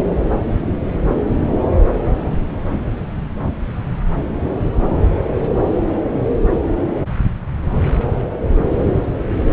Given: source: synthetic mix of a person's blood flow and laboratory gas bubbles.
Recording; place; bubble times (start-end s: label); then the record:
Doppler ultrasound of blood flow; subclavian vein
no bubbles
From the record:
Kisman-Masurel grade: 000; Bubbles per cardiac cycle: 0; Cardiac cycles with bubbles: 0%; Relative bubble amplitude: no bubbles discernible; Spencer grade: 0 (complete lack of bubble signals)